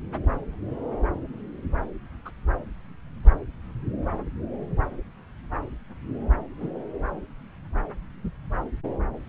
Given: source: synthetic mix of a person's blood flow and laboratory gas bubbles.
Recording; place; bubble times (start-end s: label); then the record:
Doppler ultrasound of blood flow; subclavian vein
2.25-2.31 s: bubbles
6.60-6.69 s: bubbles
From the record:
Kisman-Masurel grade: 121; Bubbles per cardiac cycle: 1 to 2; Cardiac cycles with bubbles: 10 to 50%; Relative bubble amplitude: barely perceptible (0.100 to 0.250); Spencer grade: 2 (many but less than half of the cardiac periods contain bubble signals, singularly or in groups); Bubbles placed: anywhere in the cardiac cycle